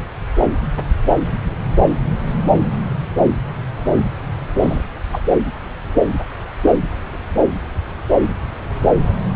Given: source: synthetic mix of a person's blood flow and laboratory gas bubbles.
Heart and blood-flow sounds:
Doppler ultrasound of blood flow; subclavian vein
4.61-4.84 s: bubbles
5.12-5.21 s: bubbles
From the record:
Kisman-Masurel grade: 113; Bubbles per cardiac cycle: 1 to 2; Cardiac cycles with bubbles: 1 to 10%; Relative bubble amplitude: loud (0.450 to 0.775); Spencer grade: 1 (occasional bubble signal discernible with the cardiac motion signal, with majority of cardiac periods free of bubbles); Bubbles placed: anywhere in the cardiac cycle

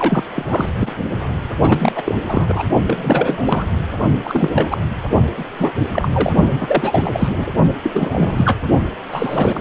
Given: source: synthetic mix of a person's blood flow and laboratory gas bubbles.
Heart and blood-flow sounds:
Doppler ultrasound of blood flow; precordium
0.00-0.24 s: bubbles
0.35-0.45 s: bubbles
0.49-0.69 s: bubbles
0.79-0.93 s: bubbles
1.60-2.15 s: bubbles
2.28-2.63 s: bubbles
2.87-3.67 s: bubbles
4.24-4.78 s: bubbles
5.37-5.45 s: bubbles
5.57-5.71 s: bubbles
5.92-6.33 s: bubbles
6.59-7.46 s: bubbles
7.83-7.90 s: bubbles
7.93-8.59 s: bubbles
9.12-9.60 s: bubbles
From the record:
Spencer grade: 3 (all of the cardiac periods contain showers or single bubble signals, but not dominating or overriding the cardiac motion signals); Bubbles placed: only in the low amplitude regions of the cardiac cycle

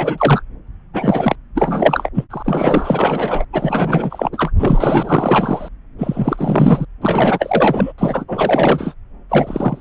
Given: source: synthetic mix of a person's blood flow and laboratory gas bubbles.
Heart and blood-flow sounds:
Doppler ultrasound of blood flow; subclavian vein
0.00-0.43 s: bubbles
0.93-1.35 s: bubbles
1.55-2.09 s: bubbles
2.13-2.25 s: bubbles
2.30-3.45 s: bubbles
3.52-4.29 s: bubbles
4.32-4.52 s: bubbles
4.58-5.69 s: bubbles
5.98-6.85 s: bubbles
7.02-7.93 s: bubbles
7.98-8.94 s: bubbles
9.29-9.81 s: bubbles
From the record:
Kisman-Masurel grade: 444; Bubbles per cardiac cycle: continuous sound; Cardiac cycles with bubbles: 100%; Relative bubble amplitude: maximal (0.775 to 0.999); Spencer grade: 4 (maximum detectable bubble signal sounding continuously throughout systole and diastole of every cardiac period, and overriding the amplitude of the normal cardiac signals); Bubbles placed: anywhere in the cardiac cycle

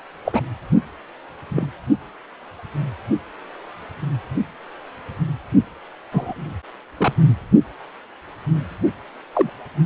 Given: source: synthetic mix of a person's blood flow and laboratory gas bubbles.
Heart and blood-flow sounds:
Doppler ultrasound of blood flow; precordium
0.24-0.41 s: bubbles
1.49-1.67 s: bubbles
6.12-6.34 s: bubbles
6.97-7.13 s: bubbles
9.33-9.50 s: bubbles
From the record:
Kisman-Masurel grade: 123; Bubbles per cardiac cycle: 1 to 2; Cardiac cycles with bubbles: 10 to 50%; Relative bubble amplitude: loud (0.450 to 0.775); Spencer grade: 2 (many but less than half of the cardiac periods contain bubble signals, singularly or in groups); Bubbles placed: only in the low amplitude regions of the cardiac cycle

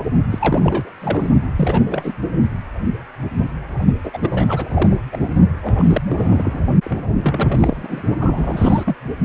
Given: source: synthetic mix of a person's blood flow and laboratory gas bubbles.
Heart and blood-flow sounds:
Doppler ultrasound of blood flow; precordium
0.30-0.90 s: bubbles
1.00-1.29 s: bubbles
1.56-1.80 s: bubbles
1.87-2.13 s: bubbles
4.04-4.11 s: bubbles
4.13-4.19 s: bubbles
4.22-4.97 s: bubbles
5.12-5.18 s: bubbles
5.62-6.02 s: bubbles
6.09-6.62 s: bubbles
6.84-7.16 s: bubbles
7.19-8.02 s: bubbles
8.18-8.96 s: bubbles
From the record:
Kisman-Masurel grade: 332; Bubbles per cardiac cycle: rolling drumbeat, 9 or more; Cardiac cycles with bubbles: 50 to 99%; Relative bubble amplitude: moderate (0.250 to 0.450); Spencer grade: 3 (all of the cardiac periods contain showers or single bubble signals, but not dominating or overriding the cardiac motion signals); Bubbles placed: only in the low amplitude regions of the cardiac cycle

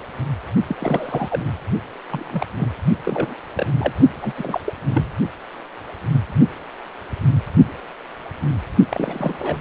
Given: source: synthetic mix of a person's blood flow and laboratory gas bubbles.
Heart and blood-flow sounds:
Doppler ultrasound of blood flow; precordium
0.68-0.76 s: bubbles
0.79-1.43 s: bubbles
2.10-2.46 s: bubbles
2.57-2.74 s: bubbles
3.03-3.34 s: bubbles
3.55-3.67 s: bubbles
3.78-3.94 s: bubbles
4.22-4.33 s: bubbles
4.36-4.61 s: bubbles
4.65-4.74 s: bubbles
4.86-5.11 s: bubbles
8.91-9.61 s: bubbles
From the record:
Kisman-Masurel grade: 332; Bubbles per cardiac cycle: rolling drumbeat, 9 or more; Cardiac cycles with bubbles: 50 to 99%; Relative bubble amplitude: moderate (0.250 to 0.450); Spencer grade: 3 (all of the cardiac periods contain showers or single bubble signals, but not dominating or overriding the cardiac motion signals); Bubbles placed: only in the low amplitude regions of the cardiac cycle

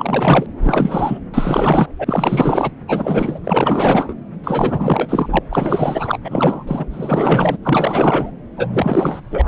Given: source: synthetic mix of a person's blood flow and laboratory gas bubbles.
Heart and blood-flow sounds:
Doppler ultrasound of blood flow; subclavian vein
0.00-0.46 s: bubbles
0.61-1.18 s: bubbles
1.33-1.88 s: bubbles
1.98-2.71 s: bubbles
2.88-3.39 s: bubbles
3.44-4.14 s: bubbles
4.44-5.39 s: bubbles
5.50-6.18 s: bubbles
6.24-6.64 s: bubbles
6.67-6.86 s: bubbles
6.91-7.58 s: bubbles
7.62-8.31 s: bubbles
8.57-9.41 s: bubbles
9.45-9.48 s: bubbles
From the record:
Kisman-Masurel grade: 444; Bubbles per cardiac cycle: continuous sound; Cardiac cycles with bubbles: 100%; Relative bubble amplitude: maximal (0.775 to 0.999); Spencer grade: 4 (maximum detectable bubble signal sounding continuously throughout systole and diastole of every cardiac period, and overriding the amplitude of the normal cardiac signals); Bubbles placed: anywhere in the cardiac cycle

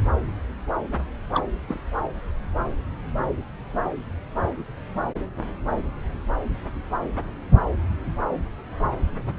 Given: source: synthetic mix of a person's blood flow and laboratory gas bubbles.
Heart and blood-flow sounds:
Doppler ultrasound of blood flow; subclavian vein
1.34-1.41 s: bubbles
1.68-1.82 s: bubbles
From the record:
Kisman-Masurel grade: 111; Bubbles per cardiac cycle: 1 to 2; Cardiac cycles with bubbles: 1 to 10%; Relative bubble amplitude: barely perceptible (0.100 to 0.250); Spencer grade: 1 (occasional bubble signal discernible with the cardiac motion signal, with majority of cardiac periods free of bubbles); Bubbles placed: anywhere in the cardiac cycle

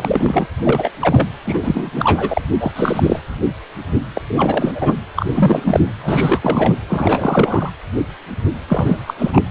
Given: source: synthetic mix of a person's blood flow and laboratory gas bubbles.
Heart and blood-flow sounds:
Doppler ultrasound of blood flow; precordium
0.00-0.48 s: bubbles
0.64-0.91 s: bubbles
1.01-1.28 s: bubbles
1.46-1.91 s: bubbles
1.95-2.42 s: bubbles
2.60-2.71 s: bubbles
2.75-3.19 s: bubbles
4.15-4.21 s: bubbles
4.28-4.96 s: bubbles
5.16-5.80 s: bubbles
6.03-6.74 s: bubbles
6.89-7.70 s: bubbles
8.68-9.02 s: bubbles
9.07-9.14 s: bubbles
9.19-9.42 s: bubbles
From the record:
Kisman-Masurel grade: 333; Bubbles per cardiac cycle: rolling drumbeat, 9 or more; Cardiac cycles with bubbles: 50 to 99%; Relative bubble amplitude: loud (0.450 to 0.775); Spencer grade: 3 (all of the cardiac periods contain showers or single bubble signals, but not dominating or overriding the cardiac motion signals); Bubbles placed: anywhere in the cardiac cycle

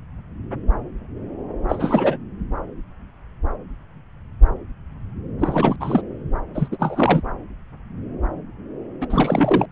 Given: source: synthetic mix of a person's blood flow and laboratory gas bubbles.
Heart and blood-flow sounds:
Doppler ultrasound of blood flow; subclavian vein
1.69-2.18 s: bubbles
5.41-5.76 s: bubbles
5.80-6.02 s: bubbles
6.54-6.68 s: bubbles
6.71-7.21 s: bubbles
9.01-9.08 s: bubbles
9.10-9.68 s: bubbles
From the record:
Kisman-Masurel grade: 222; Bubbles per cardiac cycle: several, 3 to 8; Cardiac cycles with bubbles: 10 to 50%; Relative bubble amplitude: moderate (0.250 to 0.450); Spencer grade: 2 (many but less than half of the cardiac periods contain bubble signals, singularly or in groups); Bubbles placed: anywhere in the cardiac cycle

